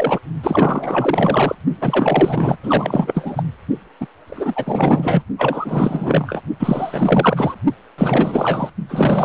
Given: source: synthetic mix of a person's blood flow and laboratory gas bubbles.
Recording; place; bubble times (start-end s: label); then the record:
Doppler ultrasound of blood flow; precordium
0.00-0.20 s: bubbles
0.43-1.55 s: bubbles
1.81-2.58 s: bubbles
2.63-3.44 s: bubbles
4.00-4.07 s: bubbles
4.28-5.23 s: bubbles
5.38-6.41 s: bubbles
6.59-7.54 s: bubbles
7.98-8.70 s: bubbles
8.89-9.25 s: bubbles
From the record:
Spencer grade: 4 (maximum detectable bubble signal sounding continuously throughout systole and diastole of every cardiac period, and overriding the amplitude of the normal cardiac signals); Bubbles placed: only in the low amplitude regions of the cardiac cycle